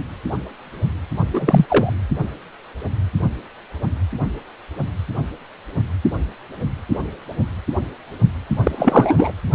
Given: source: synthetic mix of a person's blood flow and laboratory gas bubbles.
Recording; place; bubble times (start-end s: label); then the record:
Doppler ultrasound of blood flow; precordium
1.33-1.93 s: bubbles
8.63-9.32 s: bubbles
From the record:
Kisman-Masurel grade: 223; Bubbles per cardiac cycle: several, 3 to 8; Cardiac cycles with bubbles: 10 to 50%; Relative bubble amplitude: loud (0.450 to 0.775); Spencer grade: 2 (many but less than half of the cardiac periods contain bubble signals, singularly or in groups); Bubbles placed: only in the low amplitude regions of the cardiac cycle